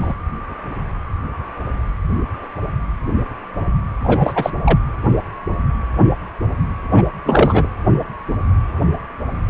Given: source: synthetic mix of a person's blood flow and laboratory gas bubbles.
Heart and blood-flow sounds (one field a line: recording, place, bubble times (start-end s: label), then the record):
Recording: Doppler ultrasound of blood flow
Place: precordium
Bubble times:
0.00-0.14 s: bubbles
4.04-4.50 s: bubbles
4.65-4.79 s: bubbles
6.92-7.02 s: bubbles
7.25-7.67 s: bubbles
From the record:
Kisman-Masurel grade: 223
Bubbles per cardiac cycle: several, 3 to 8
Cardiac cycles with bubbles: 10 to 50%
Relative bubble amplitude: loud (0.450 to 0.775)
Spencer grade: 2 (many but less than half of the cardiac periods contain bubble signals, singularly or in groups)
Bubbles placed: anywhere in the cardiac cycle